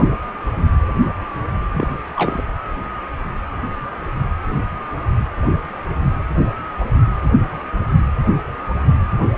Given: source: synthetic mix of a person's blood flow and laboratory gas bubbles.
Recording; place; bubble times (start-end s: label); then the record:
Doppler ultrasound of blood flow; precordium
1.73-1.88 s: bubbles
2.16-2.42 s: bubbles
From the record:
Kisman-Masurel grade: 212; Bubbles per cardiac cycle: several, 3 to 8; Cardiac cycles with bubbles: 1 to 10%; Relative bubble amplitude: moderate (0.250 to 0.450); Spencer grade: 1 (occasional bubble signal discernible with the cardiac motion signal, with majority of cardiac periods free of bubbles); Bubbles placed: anywhere in the cardiac cycle